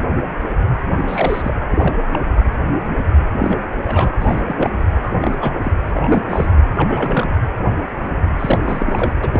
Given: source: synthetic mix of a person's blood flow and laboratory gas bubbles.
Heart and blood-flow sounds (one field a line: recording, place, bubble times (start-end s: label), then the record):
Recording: Doppler ultrasound of blood flow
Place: precordium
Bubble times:
1.07-1.55 s: bubbles
1.61-1.95 s: bubbles
2.11-2.20 s: bubbles
3.39-3.57 s: bubbles
3.84-4.11 s: bubbles
4.21-4.42 s: bubbles
4.46-4.85 s: bubbles
5.03-5.12 s: bubbles
5.21-5.59 s: bubbles
5.63-5.73 s: bubbles
5.92-6.24 s: bubbles
6.29-6.47 s: bubbles
6.76-7.36 s: bubbles
8.39-8.59 s: bubbles
8.62-9.12 s: bubbles
9.22-9.29 s: bubbles
9.33-9.40 s: bubbles
From the record:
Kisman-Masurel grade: 232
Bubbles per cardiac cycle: several, 3 to 8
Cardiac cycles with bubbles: 50 to 99%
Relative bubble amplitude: moderate (0.250 to 0.450)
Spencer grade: 3 (all of the cardiac periods contain showers or single bubble signals, but not dominating or overriding the cardiac motion signals)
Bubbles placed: anywhere in the cardiac cycle